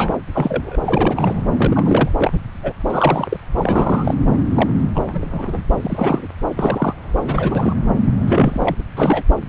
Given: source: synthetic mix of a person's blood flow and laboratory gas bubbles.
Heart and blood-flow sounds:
Doppler ultrasound of blood flow; subclavian vein
0.00-0.16 s: bubbles
0.33-0.77 s: bubbles
0.86-1.42 s: bubbles
1.57-2.09 s: bubbles
2.19-2.39 s: bubbles
2.63-2.72 s: bubbles
2.90-3.37 s: bubbles
3.58-4.15 s: bubbles
4.54-4.71 s: bubbles
4.94-5.62 s: bubbles
5.83-6.28 s: bubbles
6.56-6.94 s: bubbles
7.25-7.74 s: bubbles
8.26-8.75 s: bubbles
8.79-8.82 s: bubbles
8.96-9.23 s: bubbles
From the record:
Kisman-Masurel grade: 242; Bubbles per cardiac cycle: several, 3 to 8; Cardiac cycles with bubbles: 100%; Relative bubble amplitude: moderate (0.250 to 0.450); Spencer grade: 3 (all of the cardiac periods contain showers or single bubble signals, but not dominating or overriding the cardiac motion signals); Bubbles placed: anywhere in the cardiac cycle

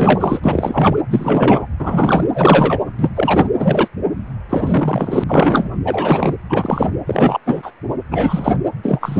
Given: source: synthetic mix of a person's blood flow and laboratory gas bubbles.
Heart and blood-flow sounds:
Doppler ultrasound of blood flow; precordium
0.00-0.40 s: bubbles
0.43-0.97 s: bubbles
1.09-1.67 s: bubbles
1.79-2.23 s: bubbles
2.34-2.80 s: bubbles
2.99-3.10 s: bubbles
3.15-3.48 s: bubbles
3.58-3.88 s: bubbles
4.49-5.24 s: bubbles
5.28-5.71 s: bubbles
5.84-6.36 s: bubbles
6.50-6.90 s: bubbles
7.07-7.38 s: bubbles
7.46-7.72 s: bubbles
8.11-8.56 s: bubbles
8.83-9.20 s: bubbles
From the record:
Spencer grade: 3 (all of the cardiac periods contain showers or single bubble signals, but not dominating or overriding the cardiac motion signals); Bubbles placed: anywhere in the cardiac cycle

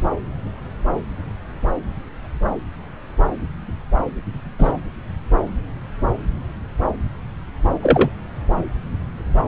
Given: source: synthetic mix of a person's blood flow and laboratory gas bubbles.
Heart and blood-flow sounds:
Doppler ultrasound of blood flow; subclavian vein
4.59-4.72 s: bubbles
7.82-8.11 s: bubbles
From the record:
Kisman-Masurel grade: 123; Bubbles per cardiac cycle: 1 to 2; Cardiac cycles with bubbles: 10 to 50%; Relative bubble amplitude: loud (0.450 to 0.775); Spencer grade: 2 (many but less than half of the cardiac periods contain bubble signals, singularly or in groups); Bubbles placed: anywhere in the cardiac cycle

